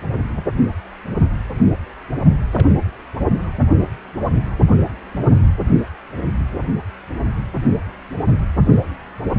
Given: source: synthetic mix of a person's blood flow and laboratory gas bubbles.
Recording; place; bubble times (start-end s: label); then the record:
Doppler ultrasound of blood flow; precordium
2.52-2.68 s: bubbles
2.76-2.82 s: bubbles
From the record:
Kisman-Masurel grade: 211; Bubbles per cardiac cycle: several, 3 to 8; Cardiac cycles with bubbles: 1 to 10%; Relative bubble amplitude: barely perceptible (0.100 to 0.250); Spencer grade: 1 (occasional bubble signal discernible with the cardiac motion signal, with majority of cardiac periods free of bubbles); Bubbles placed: only in the low amplitude regions of the cardiac cycle